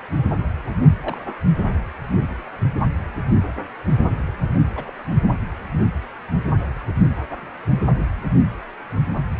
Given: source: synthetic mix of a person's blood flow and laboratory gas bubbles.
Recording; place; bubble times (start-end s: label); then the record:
Doppler ultrasound of blood flow; precordium
1.01-1.18 s: bubbles
4.75-4.85 s: bubbles
4.87-4.91 s: bubbles
From the record:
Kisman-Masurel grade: 111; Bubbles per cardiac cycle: 1 to 2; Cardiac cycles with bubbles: 1 to 10%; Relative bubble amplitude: barely perceptible (0.100 to 0.250); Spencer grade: 1 (occasional bubble signal discernible with the cardiac motion signal, with majority of cardiac periods free of bubbles); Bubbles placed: anywhere in the cardiac cycle